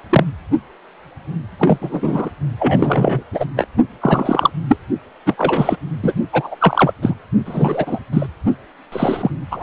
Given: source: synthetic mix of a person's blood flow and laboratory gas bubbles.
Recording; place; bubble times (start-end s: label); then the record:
Doppler ultrasound of blood flow; precordium
0.10-0.24 s: bubbles
1.59-2.29 s: bubbles
2.58-3.23 s: bubbles
3.32-3.46 s: bubbles
3.56-3.67 s: bubbles
4.01-4.51 s: bubbles
4.69-4.78 s: bubbles
5.26-5.77 s: bubbles
6.02-6.13 s: bubbles
6.33-6.55 s: bubbles
6.60-6.92 s: bubbles
7.02-7.15 s: bubbles
7.46-8.00 s: bubbles
8.13-8.26 s: bubbles
8.92-9.30 s: bubbles
9.51-9.63 s: bubbles
From the record:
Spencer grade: 3 (all of the cardiac periods contain showers or single bubble signals, but not dominating or overriding the cardiac motion signals); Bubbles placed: only in the low amplitude regions of the cardiac cycle